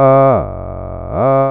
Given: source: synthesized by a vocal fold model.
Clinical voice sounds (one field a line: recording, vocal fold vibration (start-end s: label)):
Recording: sustained vowel that changes in the middle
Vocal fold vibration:
0.00-0.28 s: 134.8 Hz, open quotient 0.52
0.48-1.08 s: 45.6 Hz, open quotient 0.41
1.28-1.51 s: 134.8 Hz, open quotient 0.52